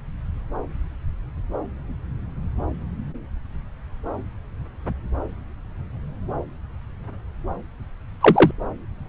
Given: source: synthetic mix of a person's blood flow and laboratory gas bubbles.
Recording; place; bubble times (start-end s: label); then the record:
Doppler ultrasound of blood flow; subclavian vein
8.20-8.51 s: bubbles
From the record:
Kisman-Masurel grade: 123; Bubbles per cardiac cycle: 1 to 2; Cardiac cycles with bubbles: 10 to 50%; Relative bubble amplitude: loud (0.450 to 0.775); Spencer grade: 2 (many but less than half of the cardiac periods contain bubble signals, singularly or in groups); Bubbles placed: anywhere in the cardiac cycle